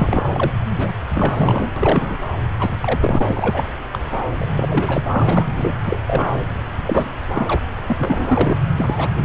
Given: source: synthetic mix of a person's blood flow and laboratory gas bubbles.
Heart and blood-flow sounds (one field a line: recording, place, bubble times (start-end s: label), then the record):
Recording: Doppler ultrasound of blood flow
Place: subclavian vein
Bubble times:
0.00-0.25 s: bubbles
0.33-0.52 s: bubbles
0.78-0.94 s: bubbles
1.08-1.71 s: bubbles
1.76-2.23 s: bubbles
2.59-2.75 s: bubbles
2.82-3.67 s: bubbles
3.93-3.99 s: bubbles
4.38-5.09 s: bubbles
5.14-5.48 s: bubbles
5.57-5.74 s: bubbles
5.86-5.97 s: bubbles
6.07-6.27 s: bubbles
6.87-7.06 s: bubbles
7.34-7.61 s: bubbles
7.86-7.96 s: bubbles
7.99-8.59 s: bubbles
8.78-9.10 s: bubbles
9.16-9.25 s: bubbles
From the record:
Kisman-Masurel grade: 342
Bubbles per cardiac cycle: rolling drumbeat, 9 or more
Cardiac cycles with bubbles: 100%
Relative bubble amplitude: moderate (0.250 to 0.450)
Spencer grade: 3 (all of the cardiac periods contain showers or single bubble signals, but not dominating or overriding the cardiac motion signals)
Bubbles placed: anywhere in the cardiac cycle